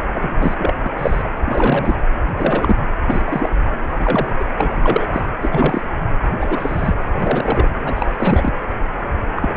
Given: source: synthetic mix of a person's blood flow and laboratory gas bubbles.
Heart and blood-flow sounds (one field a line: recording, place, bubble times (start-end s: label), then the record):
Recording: Doppler ultrasound of blood flow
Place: precordium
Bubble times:
0.15-0.55 s: bubbles
0.58-0.72 s: bubbles
0.84-0.89 s: bubbles
0.97-1.22 s: bubbles
1.44-1.95 s: bubbles
2.37-2.76 s: bubbles
3.07-3.54 s: bubbles
3.60-3.77 s: bubbles
3.99-4.28 s: bubbles
4.38-4.45 s: bubbles
4.57-5.07 s: bubbles
5.12-5.22 s: bubbles
5.42-5.81 s: bubbles
6.38-6.93 s: bubbles
7.13-7.67 s: bubbles
7.82-8.06 s: bubbles
8.18-8.51 s: bubbles
9.36-9.54 s: bubbles
From the record:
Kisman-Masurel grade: 233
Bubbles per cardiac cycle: several, 3 to 8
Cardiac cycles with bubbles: 50 to 99%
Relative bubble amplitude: loud (0.450 to 0.775)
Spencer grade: 3 (all of the cardiac periods contain showers or single bubble signals, but not dominating or overriding the cardiac motion signals)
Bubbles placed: anywhere in the cardiac cycle